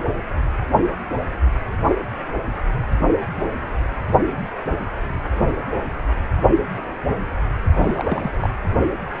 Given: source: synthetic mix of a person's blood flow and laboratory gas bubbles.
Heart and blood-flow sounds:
Doppler ultrasound of blood flow; precordium
7.75-8.31 s: bubbles
8.38-8.50 s: bubbles
From the record:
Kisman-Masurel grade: 211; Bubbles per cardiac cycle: several, 3 to 8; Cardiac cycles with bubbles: 1 to 10%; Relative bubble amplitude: barely perceptible (0.100 to 0.250); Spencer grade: 1 (occasional bubble signal discernible with the cardiac motion signal, with majority of cardiac periods free of bubbles); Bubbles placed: only in the low amplitude regions of the cardiac cycle

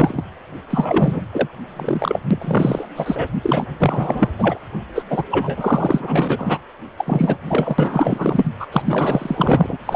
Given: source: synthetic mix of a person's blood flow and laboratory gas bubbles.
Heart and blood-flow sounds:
Doppler ultrasound of blood flow; precordium
0.00-0.23 s: bubbles
0.69-1.24 s: bubbles
1.32-1.48 s: bubbles
1.76-2.20 s: bubbles
2.31-2.88 s: bubbles
2.96-3.27 s: bubbles
3.43-3.67 s: bubbles
3.81-4.31 s: bubbles
4.38-4.59 s: bubbles
4.95-5.04 s: bubbles
5.10-5.23 s: bubbles
5.31-6.58 s: bubbles
6.98-7.36 s: bubbles
7.45-8.51 s: bubbles
8.60-8.67 s: bubbles
8.72-8.82 s: bubbles
8.85-9.77 s: bubbles
9.86-9.96 s: bubbles
From the record:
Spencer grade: 4 (maximum detectable bubble signal sounding continuously throughout systole and diastole of every cardiac period, and overriding the amplitude of the normal cardiac signals); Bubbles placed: anywhere in the cardiac cycle

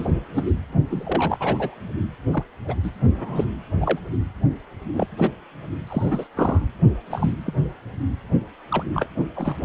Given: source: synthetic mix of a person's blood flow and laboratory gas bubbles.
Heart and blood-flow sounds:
Doppler ultrasound of blood flow; precordium
0.00-0.10 s: bubbles
0.34-0.54 s: bubbles
0.90-1.75 s: bubbles
2.33-2.44 s: bubbles
2.68-2.76 s: bubbles
2.83-2.90 s: bubbles
3.18-3.45 s: bubbles
3.81-4.00 s: bubbles
4.93-5.07 s: bubbles
5.17-5.30 s: bubbles
5.87-6.27 s: bubbles
6.36-6.67 s: bubbles
7.10-7.32 s: bubbles
7.46-7.53 s: bubbles
8.71-8.83 s: bubbles
8.94-9.09 s: bubbles
9.17-9.24 s: bubbles
9.36-9.56 s: bubbles
From the record:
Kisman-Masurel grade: 242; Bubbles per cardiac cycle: several, 3 to 8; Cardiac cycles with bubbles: 100%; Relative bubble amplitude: moderate (0.250 to 0.450); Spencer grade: 3 (all of the cardiac periods contain showers or single bubble signals, but not dominating or overriding the cardiac motion signals); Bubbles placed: only in the low amplitude regions of the cardiac cycle

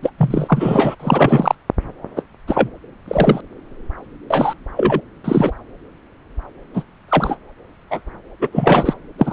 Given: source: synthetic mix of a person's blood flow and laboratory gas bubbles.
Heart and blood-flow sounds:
Doppler ultrasound of blood flow; subclavian vein
0.02-0.10 s: bubbles
0.18-0.95 s: bubbles
0.99-1.55 s: bubbles
2.16-2.23 s: bubbles
2.48-2.70 s: bubbles
3.08-3.41 s: bubbles
4.30-4.54 s: bubbles
4.76-5.01 s: bubbles
5.24-5.51 s: bubbles
6.74-6.83 s: bubbles
7.08-7.35 s: bubbles
7.90-8.00 s: bubbles
8.41-8.48 s: bubbles
8.52-8.94 s: bubbles
9.19-9.33 s: bubbles
From the record:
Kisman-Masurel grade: 243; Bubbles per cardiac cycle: several, 3 to 8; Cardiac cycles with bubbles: 100%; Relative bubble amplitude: loud (0.450 to 0.775); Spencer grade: 3 (all of the cardiac periods contain showers or single bubble signals, but not dominating or overriding the cardiac motion signals); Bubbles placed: anywhere in the cardiac cycle

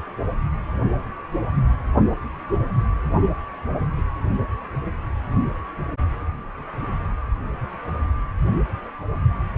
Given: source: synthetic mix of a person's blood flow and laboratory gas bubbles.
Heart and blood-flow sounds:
Doppler ultrasound of blood flow; precordium
1.95-2.02 s: bubbles
From the record:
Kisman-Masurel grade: 111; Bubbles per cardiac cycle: 1 to 2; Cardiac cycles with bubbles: 1 to 10%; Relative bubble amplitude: barely perceptible (0.100 to 0.250); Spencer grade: 1 (occasional bubble signal discernible with the cardiac motion signal, with majority of cardiac periods free of bubbles); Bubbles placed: anywhere in the cardiac cycle

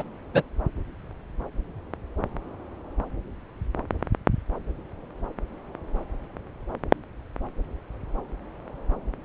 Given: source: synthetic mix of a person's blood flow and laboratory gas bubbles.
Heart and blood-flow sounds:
Doppler ultrasound of blood flow; subclavian vein
0.00-0.04 s: bubbles
0.33-0.43 s: bubbles
From the record:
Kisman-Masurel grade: 113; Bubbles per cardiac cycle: 1 to 2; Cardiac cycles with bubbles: 1 to 10%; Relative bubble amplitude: loud (0.450 to 0.775); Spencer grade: 1 (occasional bubble signal discernible with the cardiac motion signal, with majority of cardiac periods free of bubbles); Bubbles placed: anywhere in the cardiac cycle

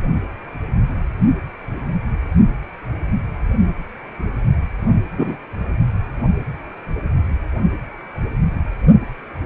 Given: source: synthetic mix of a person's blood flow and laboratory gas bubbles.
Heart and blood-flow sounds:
Doppler ultrasound of blood flow; precordium
5.18-5.36 s: bubbles
From the record:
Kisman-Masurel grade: 113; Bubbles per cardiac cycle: 1 to 2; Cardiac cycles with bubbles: 1 to 10%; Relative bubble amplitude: loud (0.450 to 0.775); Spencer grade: 1 (occasional bubble signal discernible with the cardiac motion signal, with majority of cardiac periods free of bubbles); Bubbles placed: only in the low amplitude regions of the cardiac cycle

